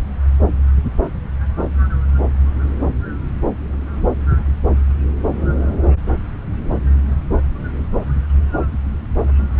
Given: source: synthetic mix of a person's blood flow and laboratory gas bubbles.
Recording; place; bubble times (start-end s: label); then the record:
Doppler ultrasound of blood flow; subclavian vein
no bubbles
From the record:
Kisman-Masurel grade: 000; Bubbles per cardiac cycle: 0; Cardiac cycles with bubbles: 0%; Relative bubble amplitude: no bubbles discernible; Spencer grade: 0 (complete lack of bubble signals)